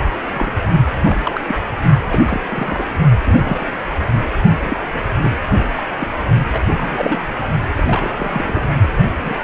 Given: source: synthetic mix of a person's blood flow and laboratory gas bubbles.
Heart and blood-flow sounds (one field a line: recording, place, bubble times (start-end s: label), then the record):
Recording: Doppler ultrasound of blood flow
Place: precordium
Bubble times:
0.33-0.56 s: bubbles
1.04-1.18 s: bubbles
1.23-1.41 s: bubbles
1.48-1.55 s: bubbles
2.09-2.18 s: bubbles
2.27-2.41 s: bubbles
2.50-2.83 s: bubbles
3.25-3.66 s: bubbles
3.99-4.03 s: bubbles
4.59-4.79 s: bubbles
5.21-5.37 s: bubbles
5.76-5.82 s: bubbles
5.99-6.08 s: bubbles
6.53-7.19 s: bubbles
7.41-7.47 s: bubbles
7.75-8.12 s: bubbles
8.16-8.70 s: bubbles
8.82-8.87 s: bubbles
9.20-9.35 s: bubbles
From the record:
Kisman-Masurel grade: 242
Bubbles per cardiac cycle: several, 3 to 8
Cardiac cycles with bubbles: 100%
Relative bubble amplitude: moderate (0.250 to 0.450)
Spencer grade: 3 (all of the cardiac periods contain showers or single bubble signals, but not dominating or overriding the cardiac motion signals)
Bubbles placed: only in the low amplitude regions of the cardiac cycle